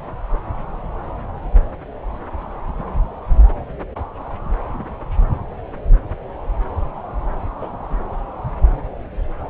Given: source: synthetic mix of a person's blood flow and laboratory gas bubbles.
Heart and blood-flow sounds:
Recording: Doppler ultrasound of blood flow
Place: subclavian vein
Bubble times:
7.61-7.67 s: bubbles
From the record:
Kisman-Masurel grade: 112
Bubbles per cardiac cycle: 1 to 2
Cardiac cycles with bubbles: 1 to 10%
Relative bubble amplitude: moderate (0.250 to 0.450)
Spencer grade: 1 (occasional bubble signal discernible with the cardiac motion signal, with majority of cardiac periods free of bubbles)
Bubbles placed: anywhere in the cardiac cycle

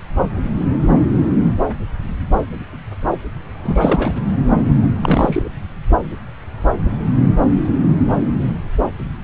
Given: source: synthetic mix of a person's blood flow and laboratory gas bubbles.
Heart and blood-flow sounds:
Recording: Doppler ultrasound of blood flow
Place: subclavian vein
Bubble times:
3.63-4.14 s: bubbles
5.02-5.50 s: bubbles
From the record:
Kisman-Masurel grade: 222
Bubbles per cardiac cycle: several, 3 to 8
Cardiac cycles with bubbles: 10 to 50%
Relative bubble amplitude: moderate (0.250 to 0.450)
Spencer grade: 2 (many but less than half of the cardiac periods contain bubble signals, singularly or in groups)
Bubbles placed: anywhere in the cardiac cycle

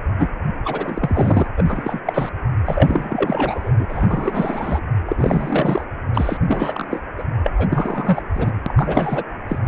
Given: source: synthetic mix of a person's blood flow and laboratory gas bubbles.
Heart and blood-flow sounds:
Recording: Doppler ultrasound of blood flow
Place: precordium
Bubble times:
0.18-0.28 s: bubbles
0.64-1.46 s: bubbles
1.56-2.00 s: bubbles
2.06-2.29 s: bubbles
2.65-3.71 s: bubbles
3.78-4.82 s: bubbles
5.06-5.86 s: bubbles
6.14-6.38 s: bubbles
6.44-7.02 s: bubbles
7.18-7.23 s: bubbles
7.44-7.51 s: bubbles
7.58-7.68 s: bubbles
7.71-8.22 s: bubbles
8.34-8.51 s: bubbles
8.66-9.23 s: bubbles
9.48-9.58 s: bubbles
From the record:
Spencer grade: 3 (all of the cardiac periods contain showers or single bubble signals, but not dominating or overriding the cardiac motion signals)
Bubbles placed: anywhere in the cardiac cycle

